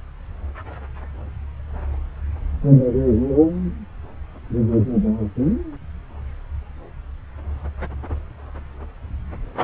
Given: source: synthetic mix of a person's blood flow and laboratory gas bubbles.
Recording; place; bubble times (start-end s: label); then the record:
Doppler ultrasound of blood flow; subclavian vein
no bubbles
From the record:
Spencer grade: 0 (complete lack of bubble signals)